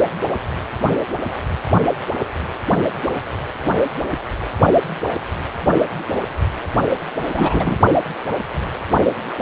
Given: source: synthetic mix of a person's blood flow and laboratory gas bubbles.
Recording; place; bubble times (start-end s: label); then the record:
Doppler ultrasound of blood flow; precordium
7.33-7.76 s: bubbles
From the record:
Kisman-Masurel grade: 223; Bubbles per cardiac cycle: several, 3 to 8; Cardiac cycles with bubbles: 10 to 50%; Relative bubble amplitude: loud (0.450 to 0.775); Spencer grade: 2 (many but less than half of the cardiac periods contain bubble signals, singularly or in groups); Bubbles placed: only in the low amplitude regions of the cardiac cycle